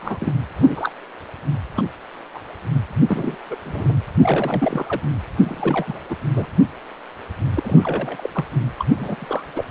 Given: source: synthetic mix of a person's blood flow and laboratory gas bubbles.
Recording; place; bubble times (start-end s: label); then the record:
Doppler ultrasound of blood flow; precordium
0.01-0.33 s: bubbles
0.62-0.91 s: bubbles
1.75-1.84 s: bubbles
2.33-2.40 s: bubbles
3.07-3.38 s: bubbles
3.50-3.56 s: bubbles
3.65-3.96 s: bubbles
4.19-5.00 s: bubbles
5.37-5.99 s: bubbles
6.09-6.16 s: bubbles
6.35-6.47 s: bubbles
7.55-8.29 s: bubbles
8.32-8.45 s: bubbles
8.79-8.86 s: bubbles
8.96-9.46 s: bubbles
9.55-9.64 s: bubbles
From the record:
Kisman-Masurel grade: 232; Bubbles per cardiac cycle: several, 3 to 8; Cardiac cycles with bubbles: 50 to 99%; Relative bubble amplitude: moderate (0.250 to 0.450); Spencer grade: 3 (all of the cardiac periods contain showers or single bubble signals, but not dominating or overriding the cardiac motion signals); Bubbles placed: anywhere in the cardiac cycle